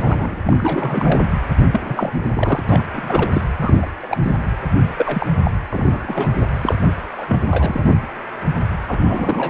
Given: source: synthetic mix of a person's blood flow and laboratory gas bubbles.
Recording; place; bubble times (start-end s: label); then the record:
Doppler ultrasound of blood flow; precordium
0.00-0.36 s: bubbles
0.47-1.20 s: bubbles
1.72-2.12 s: bubbles
2.36-2.62 s: bubbles
2.69-2.84 s: bubbles
2.92-3.42 s: bubbles
3.57-3.87 s: bubbles
4.02-4.17 s: bubbles
4.24-4.35 s: bubbles
4.98-5.27 s: bubbles
5.44-5.51 s: bubbles
5.70-6.29 s: bubbles
6.40-6.46 s: bubbles
6.62-6.76 s: bubbles
7.18-7.41 s: bubbles
7.50-7.95 s: bubbles
8.88-9.50 s: bubbles
From the record:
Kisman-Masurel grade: 332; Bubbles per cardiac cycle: rolling drumbeat, 9 or more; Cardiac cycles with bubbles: 50 to 99%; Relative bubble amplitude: moderate (0.250 to 0.450); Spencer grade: 3 (all of the cardiac periods contain showers or single bubble signals, but not dominating or overriding the cardiac motion signals); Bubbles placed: anywhere in the cardiac cycle